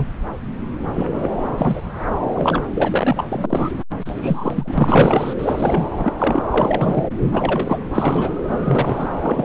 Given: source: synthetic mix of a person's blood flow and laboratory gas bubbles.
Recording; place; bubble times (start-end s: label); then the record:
Doppler ultrasound of blood flow; subclavian vein
0.00-0.06 s: bubbles
0.94-1.29 s: bubbles
1.40-1.50 s: bubbles
1.57-1.81 s: bubbles
2.35-2.62 s: bubbles
2.75-3.25 s: bubbles
3.31-3.70 s: bubbles
4.05-5.33 s: bubbles
5.39-5.88 s: bubbles
5.97-6.12 s: bubbles
6.18-6.43 s: bubbles
6.50-7.04 s: bubbles
7.32-7.78 s: bubbles
7.93-8.31 s: bubbles
8.48-9.07 s: bubbles
9.22-9.44 s: bubbles
From the record:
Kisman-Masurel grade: 233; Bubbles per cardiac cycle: several, 3 to 8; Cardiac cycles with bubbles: 50 to 99%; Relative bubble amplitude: loud (0.450 to 0.775); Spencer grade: 3 (all of the cardiac periods contain showers or single bubble signals, but not dominating or overriding the cardiac motion signals); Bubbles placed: anywhere in the cardiac cycle